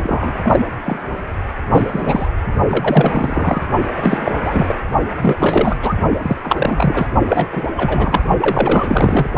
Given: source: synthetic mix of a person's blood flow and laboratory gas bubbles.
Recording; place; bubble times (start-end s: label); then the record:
Doppler ultrasound of blood flow; precordium
0.00-0.66 s: bubbles
0.85-0.99 s: bubbles
1.71-2.28 s: bubbles
2.69-3.61 s: bubbles
3.96-4.35 s: bubbles
4.44-4.74 s: bubbles
5.21-5.36 s: bubbles
5.39-5.76 s: bubbles
5.81-5.93 s: bubbles
6.22-6.36 s: bubbles
6.43-7.07 s: bubbles
7.25-7.48 s: bubbles
7.51-7.67 s: bubbles
7.76-8.21 s: bubbles
8.40-9.29 s: bubbles
From the record:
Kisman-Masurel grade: 343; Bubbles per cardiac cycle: rolling drumbeat, 9 or more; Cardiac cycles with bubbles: 100%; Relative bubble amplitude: loud (0.450 to 0.775); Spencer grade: 3 (all of the cardiac periods contain showers or single bubble signals, but not dominating or overriding the cardiac motion signals); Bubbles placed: only in the low amplitude regions of the cardiac cycle